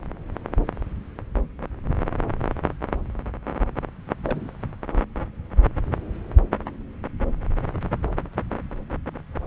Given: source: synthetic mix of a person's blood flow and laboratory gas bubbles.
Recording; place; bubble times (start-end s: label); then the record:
Doppler ultrasound of blood flow; subclavian vein
4.24-4.54 s: bubbles
From the record:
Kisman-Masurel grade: 111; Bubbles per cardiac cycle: 1 to 2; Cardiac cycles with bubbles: 1 to 10%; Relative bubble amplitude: barely perceptible (0.100 to 0.250); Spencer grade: 1 (occasional bubble signal discernible with the cardiac motion signal, with majority of cardiac periods free of bubbles); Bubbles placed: anywhere in the cardiac cycle